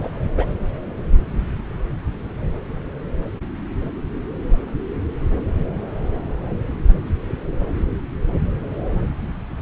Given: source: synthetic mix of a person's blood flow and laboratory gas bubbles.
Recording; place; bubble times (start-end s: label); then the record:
Doppler ultrasound of blood flow; subclavian vein
0.00-0.10 s: bubbles
0.35-0.46 s: bubbles
From the record:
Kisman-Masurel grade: 212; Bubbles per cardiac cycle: several, 3 to 8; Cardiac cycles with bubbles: 1 to 10%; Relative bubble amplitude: moderate (0.250 to 0.450); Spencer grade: 1 (occasional bubble signal discernible with the cardiac motion signal, with majority of cardiac periods free of bubbles); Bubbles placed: anywhere in the cardiac cycle